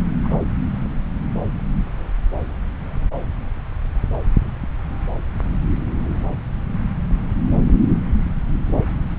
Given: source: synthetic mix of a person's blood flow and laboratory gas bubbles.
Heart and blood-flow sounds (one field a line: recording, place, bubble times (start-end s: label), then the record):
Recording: Doppler ultrasound of blood flow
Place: subclavian vein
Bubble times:
0.23-0.37 s: bubbles
From the record:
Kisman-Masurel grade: 211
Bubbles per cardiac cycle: several, 3 to 8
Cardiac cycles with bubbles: 1 to 10%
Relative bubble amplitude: barely perceptible (0.100 to 0.250)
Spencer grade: 1 (occasional bubble signal discernible with the cardiac motion signal, with majority of cardiac periods free of bubbles)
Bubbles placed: anywhere in the cardiac cycle